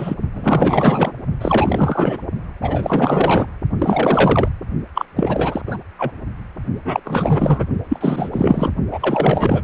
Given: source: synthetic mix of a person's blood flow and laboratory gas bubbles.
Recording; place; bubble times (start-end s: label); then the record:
Doppler ultrasound of blood flow; precordium
0.00-0.14 s: bubbles
0.33-1.12 s: bubbles
1.41-2.17 s: bubbles
2.62-3.47 s: bubbles
3.78-4.51 s: bubbles
4.94-5.05 s: bubbles
5.16-5.62 s: bubbles
5.66-5.78 s: bubbles
5.98-6.11 s: bubbles
6.84-7.00 s: bubbles
7.04-7.65 s: bubbles
7.88-8.71 s: bubbles
8.91-9.63 s: bubbles
From the record:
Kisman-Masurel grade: 444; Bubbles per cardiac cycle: continuous sound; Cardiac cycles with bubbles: 100%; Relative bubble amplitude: maximal (0.775 to 0.999); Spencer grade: 4 (maximum detectable bubble signal sounding continuously throughout systole and diastole of every cardiac period, and overriding the amplitude of the normal cardiac signals); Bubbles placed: only in the low amplitude regions of the cardiac cycle